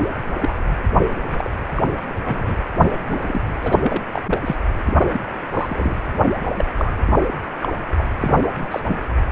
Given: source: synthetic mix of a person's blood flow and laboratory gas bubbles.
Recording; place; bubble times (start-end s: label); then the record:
Doppler ultrasound of blood flow; precordium
0.40-0.53 s: bubbles
1.32-1.49 s: bubbles
1.75-1.84 s: bubbles
2.25-2.54 s: bubbles
2.77-3.54 s: bubbles
3.62-3.78 s: bubbles
3.83-4.03 s: bubbles
4.12-4.21 s: bubbles
4.25-4.40 s: bubbles
4.46-4.55 s: bubbles
4.85-4.93 s: bubbles
4.96-5.20 s: bubbles
5.53-6.01 s: bubbles
6.56-6.70 s: bubbles
6.77-6.92 s: bubbles
7.20-7.28 s: bubbles
7.61-7.69 s: bubbles
7.98-8.04 s: bubbles
8.21-8.80 s: bubbles
8.88-9.01 s: bubbles
From the record:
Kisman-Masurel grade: 242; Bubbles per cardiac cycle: several, 3 to 8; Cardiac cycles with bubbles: 100%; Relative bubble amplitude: moderate (0.250 to 0.450); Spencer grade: 3 (all of the cardiac periods contain showers or single bubble signals, but not dominating or overriding the cardiac motion signals); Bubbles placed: anywhere in the cardiac cycle